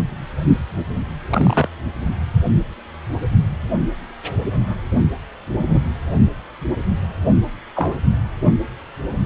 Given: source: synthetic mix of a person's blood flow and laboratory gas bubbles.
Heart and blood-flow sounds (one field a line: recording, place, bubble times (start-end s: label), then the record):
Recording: Doppler ultrasound of blood flow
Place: precordium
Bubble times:
1.29-1.69 s: bubbles
5.58-5.80 s: bubbles
7.76-7.96 s: bubbles
From the record:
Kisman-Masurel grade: 122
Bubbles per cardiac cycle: 1 to 2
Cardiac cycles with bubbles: 10 to 50%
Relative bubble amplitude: moderate (0.250 to 0.450)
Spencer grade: 2 (many but less than half of the cardiac periods contain bubble signals, singularly or in groups)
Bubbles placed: only in the low amplitude regions of the cardiac cycle